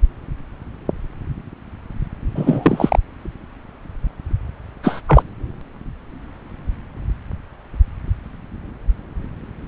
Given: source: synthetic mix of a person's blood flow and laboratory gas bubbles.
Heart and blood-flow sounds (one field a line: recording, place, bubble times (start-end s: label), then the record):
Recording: Doppler ultrasound of blood flow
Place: subclavian vein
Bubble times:
2.35-2.99 s: bubbles
4.83-5.01 s: bubbles
5.07-5.22 s: bubbles
From the record:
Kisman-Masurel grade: 223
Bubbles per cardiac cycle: several, 3 to 8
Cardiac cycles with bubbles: 10 to 50%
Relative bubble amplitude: loud (0.450 to 0.775)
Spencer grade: 2 (many but less than half of the cardiac periods contain bubble signals, singularly or in groups)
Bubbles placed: anywhere in the cardiac cycle